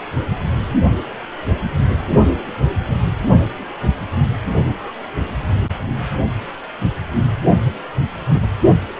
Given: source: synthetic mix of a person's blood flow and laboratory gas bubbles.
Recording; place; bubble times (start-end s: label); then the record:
Doppler ultrasound of blood flow; precordium
4.84-4.92 s: bubbles
8.28-8.50 s: bubbles
From the record:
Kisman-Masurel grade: 121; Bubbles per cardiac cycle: 1 to 2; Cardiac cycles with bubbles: 10 to 50%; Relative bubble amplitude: barely perceptible (0.100 to 0.250); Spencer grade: 2 (many but less than half of the cardiac periods contain bubble signals, singularly or in groups); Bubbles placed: only in the low amplitude regions of the cardiac cycle